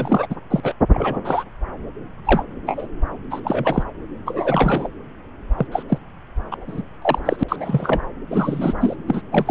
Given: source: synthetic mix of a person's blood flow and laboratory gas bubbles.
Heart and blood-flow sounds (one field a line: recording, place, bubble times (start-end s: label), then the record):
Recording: Doppler ultrasound of blood flow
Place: subclavian vein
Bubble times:
0.00-0.35 s: bubbles
0.50-0.60 s: bubbles
0.62-0.74 s: bubbles
0.94-1.19 s: bubbles
1.24-1.44 s: bubbles
2.25-2.44 s: bubbles
2.66-2.87 s: bubbles
3.31-3.40 s: bubbles
3.44-3.83 s: bubbles
4.25-4.88 s: bubbles
5.58-5.67 s: bubbles
5.71-5.83 s: bubbles
5.88-5.99 s: bubbles
6.51-6.56 s: bubbles
6.67-6.82 s: bubbles
7.02-7.19 s: bubbles
7.25-7.44 s: bubbles
7.48-8.00 s: bubbles
8.29-8.73 s: bubbles
8.80-8.96 s: bubbles
9.07-9.21 s: bubbles
9.31-9.51 s: bubbles
From the record:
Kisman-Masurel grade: 242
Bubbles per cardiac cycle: several, 3 to 8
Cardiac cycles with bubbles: 100%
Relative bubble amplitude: moderate (0.250 to 0.450)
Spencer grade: 3 (all of the cardiac periods contain showers or single bubble signals, but not dominating or overriding the cardiac motion signals)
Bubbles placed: anywhere in the cardiac cycle